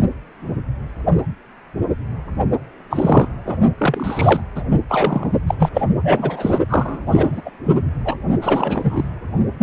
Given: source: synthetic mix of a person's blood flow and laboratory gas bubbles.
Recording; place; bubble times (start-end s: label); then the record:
Doppler ultrasound of blood flow; precordium
2.90-3.27 s: bubbles
3.46-3.57 s: bubbles
3.78-4.41 s: bubbles
4.55-4.62 s: bubbles
4.71-4.78 s: bubbles
4.88-5.29 s: bubbles
5.46-5.54 s: bubbles
5.59-5.70 s: bubbles
5.74-5.82 s: bubbles
6.04-6.58 s: bubbles
6.69-7.42 s: bubbles
7.45-7.50 s: bubbles
7.66-7.76 s: bubbles
8.05-8.14 s: bubbles
8.41-9.09 s: bubbles
9.58-9.63 s: bubbles
From the record:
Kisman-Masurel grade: 333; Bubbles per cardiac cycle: rolling drumbeat, 9 or more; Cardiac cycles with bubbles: 50 to 99%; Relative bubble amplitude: loud (0.450 to 0.775); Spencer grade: 3 (all of the cardiac periods contain showers or single bubble signals, but not dominating or overriding the cardiac motion signals); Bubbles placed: only in the low amplitude regions of the cardiac cycle